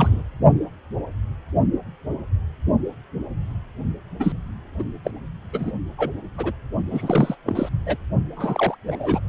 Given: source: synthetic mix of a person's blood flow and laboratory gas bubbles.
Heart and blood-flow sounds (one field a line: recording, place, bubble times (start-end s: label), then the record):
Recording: Doppler ultrasound of blood flow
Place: precordium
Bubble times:
0.00-0.23 s: bubbles
4.20-4.32 s: bubbles
4.79-4.84 s: bubbles
5.04-5.11 s: bubbles
5.53-5.71 s: bubbles
5.98-6.11 s: bubbles
6.37-6.53 s: bubbles
6.90-7.36 s: bubbles
7.46-7.69 s: bubbles
7.86-7.97 s: bubbles
8.36-8.75 s: bubbles
8.86-9.21 s: bubbles
From the record:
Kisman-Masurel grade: 233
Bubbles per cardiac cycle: several, 3 to 8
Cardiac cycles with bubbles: 50 to 99%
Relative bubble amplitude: loud (0.450 to 0.775)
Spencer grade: 3 (all of the cardiac periods contain showers or single bubble signals, but not dominating or overriding the cardiac motion signals)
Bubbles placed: only in the low amplitude regions of the cardiac cycle